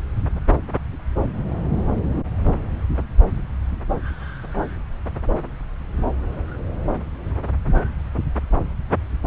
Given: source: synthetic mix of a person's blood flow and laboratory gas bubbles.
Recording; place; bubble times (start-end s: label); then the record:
Doppler ultrasound of blood flow; subclavian vein
no bubbles
From the record:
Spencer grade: 0 (complete lack of bubble signals)